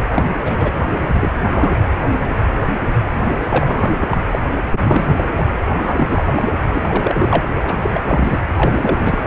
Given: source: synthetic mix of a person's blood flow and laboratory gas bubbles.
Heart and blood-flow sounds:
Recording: Doppler ultrasound of blood flow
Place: precordium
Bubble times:
0.12-0.23 s: bubbles
0.43-0.72 s: bubbles
0.98-1.17 s: bubbles
1.19-1.31 s: bubbles
1.44-1.74 s: bubbles
3.43-4.07 s: bubbles
4.11-4.17 s: bubbles
4.32-4.38 s: bubbles
4.71-5.25 s: bubbles
5.36-5.47 s: bubbles
5.72-6.23 s: bubbles
6.35-6.52 s: bubbles
6.72-7.44 s: bubbles
7.61-7.77 s: bubbles
7.81-8.02 s: bubbles
8.06-8.39 s: bubbles
8.54-9.19 s: bubbles
From the record:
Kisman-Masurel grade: 332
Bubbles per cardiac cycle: rolling drumbeat, 9 or more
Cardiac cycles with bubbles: 50 to 99%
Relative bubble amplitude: moderate (0.250 to 0.450)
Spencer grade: 3 (all of the cardiac periods contain showers or single bubble signals, but not dominating or overriding the cardiac motion signals)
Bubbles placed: anywhere in the cardiac cycle

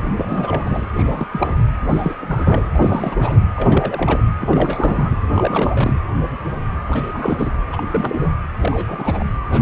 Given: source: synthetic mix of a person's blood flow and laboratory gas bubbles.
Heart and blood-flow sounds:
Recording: Doppler ultrasound of blood flow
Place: precordium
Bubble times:
0.17-0.87 s: bubbles
0.93-1.26 s: bubbles
1.31-1.54 s: bubbles
1.89-2.15 s: bubbles
2.21-2.65 s: bubbles
2.75-3.39 s: bubbles
3.56-4.24 s: bubbles
4.39-5.17 s: bubbles
5.26-5.99 s: bubbles
6.88-7.53 s: bubbles
7.72-8.32 s: bubbles
8.60-9.25 s: bubbles
9.50-9.62 s: bubbles
From the record:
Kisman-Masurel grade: 332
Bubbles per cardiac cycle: rolling drumbeat, 9 or more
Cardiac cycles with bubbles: 50 to 99%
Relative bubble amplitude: moderate (0.250 to 0.450)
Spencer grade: 3 (all of the cardiac periods contain showers or single bubble signals, but not dominating or overriding the cardiac motion signals)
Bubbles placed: anywhere in the cardiac cycle

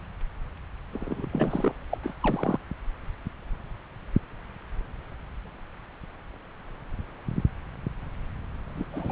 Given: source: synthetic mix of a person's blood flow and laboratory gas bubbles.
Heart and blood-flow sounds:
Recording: Doppler ultrasound of blood flow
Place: subclavian vein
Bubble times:
0.93-1.26 s: bubbles
1.31-1.75 s: bubbles
1.91-1.98 s: bubbles
2.02-2.16 s: bubbles
2.21-2.59 s: bubbles
8.77-8.86 s: bubbles
8.92-9.12 s: bubbles
From the record:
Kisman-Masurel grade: 221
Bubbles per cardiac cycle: several, 3 to 8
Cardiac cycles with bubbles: 10 to 50%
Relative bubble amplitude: barely perceptible (0.100 to 0.250)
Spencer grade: 2 (many but less than half of the cardiac periods contain bubble signals, singularly or in groups)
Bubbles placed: anywhere in the cardiac cycle

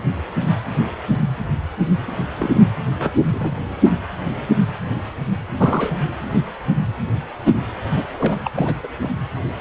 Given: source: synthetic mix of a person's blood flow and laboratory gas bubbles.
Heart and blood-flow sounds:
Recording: Doppler ultrasound of blood flow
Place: precordium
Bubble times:
2.36-2.50 s: bubbles
2.53-2.64 s: bubbles
2.99-3.11 s: bubbles
3.23-3.63 s: bubbles
3.85-3.91 s: bubbles
5.58-5.98 s: bubbles
7.90-8.04 s: bubbles
8.13-8.38 s: bubbles
8.44-8.52 s: bubbles
8.54-8.76 s: bubbles
8.83-8.88 s: bubbles
8.99-9.10 s: bubbles
From the record:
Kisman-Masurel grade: 221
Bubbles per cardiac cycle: several, 3 to 8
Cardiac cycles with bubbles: 10 to 50%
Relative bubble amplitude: barely perceptible (0.100 to 0.250)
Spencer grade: 2 (many but less than half of the cardiac periods contain bubble signals, singularly or in groups)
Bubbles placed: anywhere in the cardiac cycle

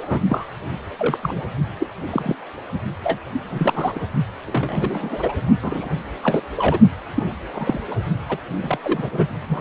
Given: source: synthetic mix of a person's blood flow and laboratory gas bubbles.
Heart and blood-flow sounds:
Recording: Doppler ultrasound of blood flow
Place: precordium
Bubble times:
0.09-0.20 s: bubbles
0.28-0.48 s: bubbles
0.99-1.18 s: bubbles
1.22-1.42 s: bubbles
1.79-1.87 s: bubbles
2.10-2.35 s: bubbles
3.03-3.18 s: bubbles
3.50-4.00 s: bubbles
4.47-5.33 s: bubbles
5.62-5.88 s: bubbles
6.22-6.42 s: bubbles
6.57-6.79 s: bubbles
7.15-7.25 s: bubbles
7.54-7.81 s: bubbles
7.91-7.96 s: bubbles
8.29-8.38 s: bubbles
8.62-8.78 s: bubbles
8.84-9.27 s: bubbles
9.49-9.61 s: bubbles
From the record:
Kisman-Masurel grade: 242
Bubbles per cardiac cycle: several, 3 to 8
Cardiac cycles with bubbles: 100%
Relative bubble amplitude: moderate (0.250 to 0.450)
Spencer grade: 3 (all of the cardiac periods contain showers or single bubble signals, but not dominating or overriding the cardiac motion signals)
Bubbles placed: only in the low amplitude regions of the cardiac cycle

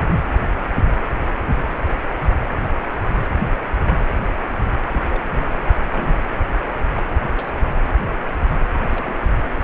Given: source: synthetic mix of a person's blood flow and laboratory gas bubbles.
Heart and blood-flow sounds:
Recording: Doppler ultrasound of blood flow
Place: precordium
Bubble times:
4.91-5.01 s: bubbles
5.10-5.50 s: bubbles
5.76-5.86 s: bubbles
5.88-6.18 s: bubbles
7.09-7.17 s: bubbles
7.22-7.51 s: bubbles
8.89-9.13 s: bubbles
From the record:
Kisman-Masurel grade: 221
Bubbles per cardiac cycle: several, 3 to 8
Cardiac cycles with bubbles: 10 to 50%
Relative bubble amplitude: barely perceptible (0.100 to 0.250)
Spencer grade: 2 (many but less than half of the cardiac periods contain bubble signals, singularly or in groups)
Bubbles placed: anywhere in the cardiac cycle

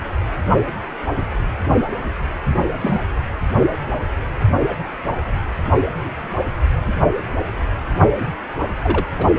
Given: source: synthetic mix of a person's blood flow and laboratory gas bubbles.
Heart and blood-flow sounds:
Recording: Doppler ultrasound of blood flow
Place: precordium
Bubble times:
2.79-3.00 s: bubbles
8.20-8.24 s: bubbles
8.83-9.04 s: bubbles
9.18-9.27 s: bubbles
From the record:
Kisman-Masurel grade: 122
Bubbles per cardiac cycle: 1 to 2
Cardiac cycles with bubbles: 10 to 50%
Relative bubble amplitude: moderate (0.250 to 0.450)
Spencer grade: 2 (many but less than half of the cardiac periods contain bubble signals, singularly or in groups)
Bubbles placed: anywhere in the cardiac cycle

